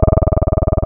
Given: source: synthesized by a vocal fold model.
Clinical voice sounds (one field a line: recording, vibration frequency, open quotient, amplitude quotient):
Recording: sustained vowel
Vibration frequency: 20 Hz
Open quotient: 0.2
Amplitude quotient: 1.1